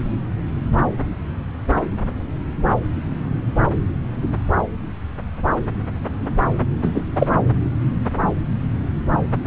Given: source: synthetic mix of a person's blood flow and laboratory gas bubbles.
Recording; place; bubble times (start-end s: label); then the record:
Doppler ultrasound of blood flow; subclavian vein
6.82-7.02 s: bubbles
7.15-7.27 s: bubbles
From the record:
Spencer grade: 1 (occasional bubble signal discernible with the cardiac motion signal, with majority of cardiac periods free of bubbles); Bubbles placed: anywhere in the cardiac cycle